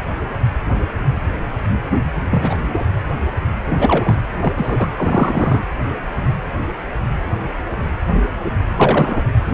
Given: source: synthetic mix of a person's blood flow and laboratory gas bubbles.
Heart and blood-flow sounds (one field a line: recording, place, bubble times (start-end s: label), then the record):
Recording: Doppler ultrasound of blood flow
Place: precordium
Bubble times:
2.30-2.85 s: bubbles
3.67-4.19 s: bubbles
4.40-4.90 s: bubbles
4.97-5.59 s: bubbles
8.76-9.24 s: bubbles
9.46-9.54 s: bubbles
From the record:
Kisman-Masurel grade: 223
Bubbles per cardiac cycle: several, 3 to 8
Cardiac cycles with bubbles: 10 to 50%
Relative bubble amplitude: loud (0.450 to 0.775)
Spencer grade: 2 (many but less than half of the cardiac periods contain bubble signals, singularly or in groups)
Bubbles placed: anywhere in the cardiac cycle